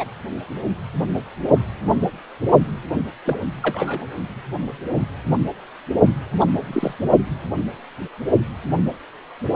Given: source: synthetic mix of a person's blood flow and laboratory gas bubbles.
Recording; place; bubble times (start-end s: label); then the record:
Doppler ultrasound of blood flow; precordium
0.00-0.05 s: bubbles
3.25-3.37 s: bubbles
3.62-4.05 s: bubbles
6.40-6.45 s: bubbles
6.62-6.94 s: bubbles
From the record:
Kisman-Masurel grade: 222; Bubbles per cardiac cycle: several, 3 to 8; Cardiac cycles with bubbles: 10 to 50%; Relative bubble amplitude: moderate (0.250 to 0.450); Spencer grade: 2 (many but less than half of the cardiac periods contain bubble signals, singularly or in groups); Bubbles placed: only in the low amplitude regions of the cardiac cycle